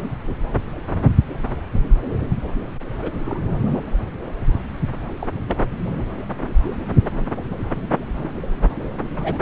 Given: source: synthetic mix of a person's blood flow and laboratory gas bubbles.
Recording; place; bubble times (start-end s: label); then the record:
Doppler ultrasound of blood flow; subclavian vein
3.01-3.11 s: bubbles
3.24-3.71 s: bubbles
5.19-5.27 s: bubbles
5.48-5.55 s: bubbles
8.07-8.28 s: bubbles
9.16-9.39 s: bubbles
From the record:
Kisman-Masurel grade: 121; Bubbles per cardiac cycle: 1 to 2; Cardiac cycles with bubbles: 10 to 50%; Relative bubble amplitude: barely perceptible (0.100 to 0.250); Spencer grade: 2 (many but less than half of the cardiac periods contain bubble signals, singularly or in groups); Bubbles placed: anywhere in the cardiac cycle